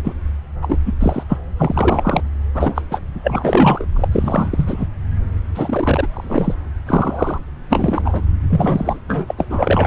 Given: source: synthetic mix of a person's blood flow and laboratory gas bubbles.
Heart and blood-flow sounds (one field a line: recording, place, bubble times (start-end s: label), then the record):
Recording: Doppler ultrasound of blood flow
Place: subclavian vein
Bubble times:
0.03-0.13 s: bubbles
0.61-0.78 s: bubbles
0.85-0.93 s: bubbles
1.00-1.23 s: bubbles
1.28-1.38 s: bubbles
1.57-2.23 s: bubbles
2.54-2.82 s: bubbles
2.90-3.01 s: bubbles
3.23-3.85 s: bubbles
3.96-4.08 s: bubbles
4.11-4.86 s: bubbles
5.54-6.07 s: bubbles
6.12-6.54 s: bubbles
6.86-7.38 s: bubbles
7.69-8.23 s: bubbles
8.49-8.99 s: bubbles
9.07-9.34 s: bubbles
9.38-9.46 s: bubbles
9.49-9.86 s: bubbles
From the record:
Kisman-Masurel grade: 243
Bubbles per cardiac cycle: several, 3 to 8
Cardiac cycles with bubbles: 100%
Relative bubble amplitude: loud (0.450 to 0.775)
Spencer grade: 3 (all of the cardiac periods contain showers or single bubble signals, but not dominating or overriding the cardiac motion signals)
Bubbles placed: anywhere in the cardiac cycle